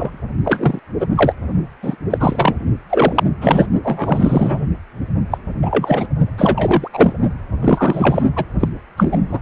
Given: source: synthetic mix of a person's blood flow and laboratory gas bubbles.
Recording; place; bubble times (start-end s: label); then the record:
Doppler ultrasound of blood flow; precordium
0.00-0.17 s: bubbles
0.44-0.79 s: bubbles
0.99-1.06 s: bubbles
1.15-1.33 s: bubbles
1.83-1.96 s: bubbles
2.10-2.55 s: bubbles
2.89-3.24 s: bubbles
3.41-3.66 s: bubbles
3.83-4.67 s: bubbles
5.31-5.38 s: bubbles
5.62-6.06 s: bubbles
6.38-6.88 s: bubbles
6.93-7.13 s: bubbles
7.62-8.24 s: bubbles
8.36-8.44 s: bubbles
8.60-8.68 s: bubbles
8.97-9.17 s: bubbles
9.29-9.39 s: bubbles
From the record:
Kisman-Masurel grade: 243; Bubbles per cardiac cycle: several, 3 to 8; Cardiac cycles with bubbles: 100%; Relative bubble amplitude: loud (0.450 to 0.775); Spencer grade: 3 (all of the cardiac periods contain showers or single bubble signals, but not dominating or overriding the cardiac motion signals); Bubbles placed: only in the low amplitude regions of the cardiac cycle